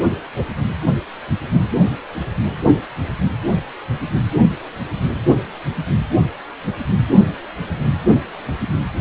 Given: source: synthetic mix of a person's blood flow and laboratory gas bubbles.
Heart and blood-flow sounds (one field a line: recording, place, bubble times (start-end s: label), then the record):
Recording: Doppler ultrasound of blood flow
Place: precordium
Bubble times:
0.36-0.43 s: bubbles
From the record:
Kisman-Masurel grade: 112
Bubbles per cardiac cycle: 1 to 2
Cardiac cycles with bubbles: 1 to 10%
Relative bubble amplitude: moderate (0.250 to 0.450)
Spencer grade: 1 (occasional bubble signal discernible with the cardiac motion signal, with majority of cardiac periods free of bubbles)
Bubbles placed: only in the low amplitude regions of the cardiac cycle